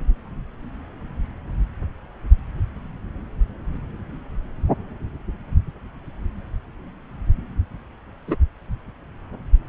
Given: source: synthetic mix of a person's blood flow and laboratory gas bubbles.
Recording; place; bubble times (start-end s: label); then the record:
Doppler ultrasound of blood flow; subclavian vein
8.27-8.36 s: bubbles
From the record:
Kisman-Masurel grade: 113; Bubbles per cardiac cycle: 1 to 2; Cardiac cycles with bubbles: 1 to 10%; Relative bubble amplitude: loud (0.450 to 0.775); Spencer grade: 1 (occasional bubble signal discernible with the cardiac motion signal, with majority of cardiac periods free of bubbles); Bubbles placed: anywhere in the cardiac cycle